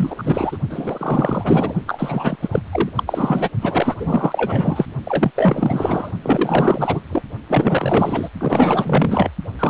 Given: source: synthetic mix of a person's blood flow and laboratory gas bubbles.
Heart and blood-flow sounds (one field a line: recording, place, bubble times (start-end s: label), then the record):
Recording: Doppler ultrasound of blood flow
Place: precordium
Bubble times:
0.00-0.57 s: bubbles
0.69-1.74 s: bubbles
1.87-2.36 s: bubbles
2.42-2.62 s: bubbles
2.71-2.90 s: bubbles
2.96-3.03 s: bubbles
3.07-3.49 s: bubbles
3.61-3.96 s: bubbles
4.00-4.85 s: bubbles
5.05-5.31 s: bubbles
5.35-6.11 s: bubbles
6.22-7.01 s: bubbles
7.09-7.22 s: bubbles
7.48-8.29 s: bubbles
8.40-9.31 s: bubbles
9.59-9.70 s: bubbles
From the record:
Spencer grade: 4 (maximum detectable bubble signal sounding continuously throughout systole and diastole of every cardiac period, and overriding the amplitude of the normal cardiac signals)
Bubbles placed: only in the low amplitude regions of the cardiac cycle